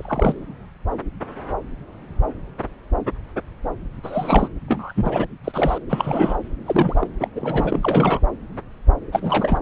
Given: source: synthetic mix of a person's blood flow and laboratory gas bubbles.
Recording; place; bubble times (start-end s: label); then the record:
Doppler ultrasound of blood flow; subclavian vein
0.00-0.34 s: bubbles
4.03-4.49 s: bubbles
4.68-4.92 s: bubbles
4.95-5.25 s: bubbles
5.44-5.78 s: bubbles
5.89-6.36 s: bubbles
6.66-7.08 s: bubbles
7.19-7.28 s: bubbles
7.35-8.19 s: bubbles
9.12-9.57 s: bubbles
From the record:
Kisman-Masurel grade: 232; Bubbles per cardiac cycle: several, 3 to 8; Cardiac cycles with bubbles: 50 to 99%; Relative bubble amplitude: moderate (0.250 to 0.450); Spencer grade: 3 (all of the cardiac periods contain showers or single bubble signals, but not dominating or overriding the cardiac motion signals); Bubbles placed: anywhere in the cardiac cycle